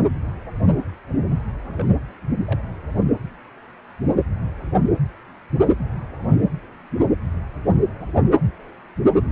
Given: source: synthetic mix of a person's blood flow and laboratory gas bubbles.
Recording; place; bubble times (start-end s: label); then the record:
Doppler ultrasound of blood flow; precordium
1.65-1.92 s: bubbles
2.45-2.60 s: bubbles
From the record:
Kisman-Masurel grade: 111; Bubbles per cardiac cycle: 1 to 2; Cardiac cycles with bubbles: 1 to 10%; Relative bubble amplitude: barely perceptible (0.100 to 0.250); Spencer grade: 1 (occasional bubble signal discernible with the cardiac motion signal, with majority of cardiac periods free of bubbles); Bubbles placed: anywhere in the cardiac cycle